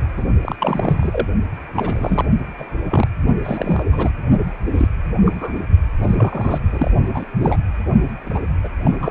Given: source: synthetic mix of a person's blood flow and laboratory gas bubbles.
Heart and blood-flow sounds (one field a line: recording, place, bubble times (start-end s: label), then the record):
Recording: Doppler ultrasound of blood flow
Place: precordium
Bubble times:
0.17-0.26 s: bubbles
0.41-0.55 s: bubbles
0.60-1.27 s: bubbles
1.75-2.25 s: bubbles
2.57-2.66 s: bubbles
2.90-3.06 s: bubbles
3.38-3.85 s: bubbles
3.92-4.11 s: bubbles
4.74-4.88 s: bubbles
5.25-5.54 s: bubbles
6.02-6.58 s: bubbles
6.69-6.91 s: bubbles
7.14-7.25 s: bubbles
7.39-7.58 s: bubbles
8.26-8.41 s: bubbles
8.63-8.69 s: bubbles
8.82-9.10 s: bubbles
From the record:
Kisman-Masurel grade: 242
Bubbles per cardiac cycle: several, 3 to 8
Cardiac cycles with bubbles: 100%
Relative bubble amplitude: moderate (0.250 to 0.450)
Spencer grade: 3 (all of the cardiac periods contain showers or single bubble signals, but not dominating or overriding the cardiac motion signals)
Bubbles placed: only in the low amplitude regions of the cardiac cycle